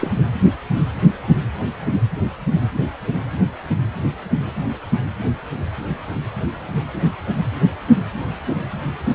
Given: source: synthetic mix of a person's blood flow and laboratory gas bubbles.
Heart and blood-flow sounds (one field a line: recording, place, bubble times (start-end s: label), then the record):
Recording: Doppler ultrasound of blood flow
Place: precordium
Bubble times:
0.00-0.14 s: bubbles
From the record:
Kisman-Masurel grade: 212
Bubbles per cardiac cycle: several, 3 to 8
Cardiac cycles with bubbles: 1 to 10%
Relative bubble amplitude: moderate (0.250 to 0.450)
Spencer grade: 1 (occasional bubble signal discernible with the cardiac motion signal, with majority of cardiac periods free of bubbles)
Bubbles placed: only in the low amplitude regions of the cardiac cycle